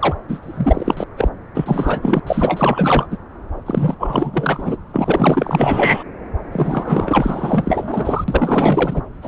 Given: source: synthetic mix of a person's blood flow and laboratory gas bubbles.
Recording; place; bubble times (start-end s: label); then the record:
Doppler ultrasound of blood flow; subclavian vein
0.00-0.15 s: bubbles
0.28-0.40 s: bubbles
0.42-1.04 s: bubbles
1.17-1.30 s: bubbles
1.54-2.20 s: bubbles
2.27-3.07 s: bubbles
3.10-3.17 s: bubbles
3.66-3.94 s: bubbles
3.99-4.77 s: bubbles
4.93-6.03 s: bubbles
6.52-8.24 s: bubbles
8.28-9.01 s: bubbles
9.21-9.28 s: bubbles
From the record:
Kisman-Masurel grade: 444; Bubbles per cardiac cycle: continuous sound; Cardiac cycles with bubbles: 100%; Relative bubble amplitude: maximal (0.775 to 0.999); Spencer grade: 4 (maximum detectable bubble signal sounding continuously throughout systole and diastole of every cardiac period, and overriding the amplitude of the normal cardiac signals); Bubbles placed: anywhere in the cardiac cycle